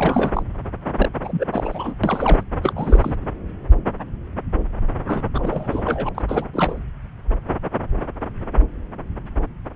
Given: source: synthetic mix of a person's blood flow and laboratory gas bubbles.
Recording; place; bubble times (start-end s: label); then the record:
Doppler ultrasound of blood flow; subclavian vein
0.00-0.42 s: bubbles
0.96-1.09 s: bubbles
1.22-1.46 s: bubbles
1.52-1.95 s: bubbles
2.04-2.44 s: bubbles
2.62-2.73 s: bubbles
2.75-3.16 s: bubbles
5.07-5.22 s: bubbles
5.34-6.09 s: bubbles
6.15-6.22 s: bubbles
6.28-6.45 s: bubbles
6.53-6.81 s: bubbles
From the record:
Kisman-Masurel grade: 332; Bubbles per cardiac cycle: rolling drumbeat, 9 or more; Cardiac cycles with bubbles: 50 to 99%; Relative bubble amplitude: moderate (0.250 to 0.450); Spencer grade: 3 (all of the cardiac periods contain showers or single bubble signals, but not dominating or overriding the cardiac motion signals); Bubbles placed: anywhere in the cardiac cycle